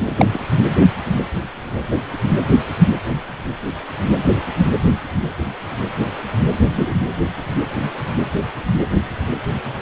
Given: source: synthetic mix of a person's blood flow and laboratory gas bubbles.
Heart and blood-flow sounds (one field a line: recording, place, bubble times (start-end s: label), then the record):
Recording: Doppler ultrasound of blood flow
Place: precordium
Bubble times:
0.17-0.26 s: bubbles
0.33-0.39 s: bubbles
6.72-6.95 s: bubbles
From the record:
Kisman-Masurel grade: 123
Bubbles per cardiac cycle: 1 to 2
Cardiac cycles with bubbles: 10 to 50%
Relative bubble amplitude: loud (0.450 to 0.775)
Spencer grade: 2 (many but less than half of the cardiac periods contain bubble signals, singularly or in groups)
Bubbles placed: anywhere in the cardiac cycle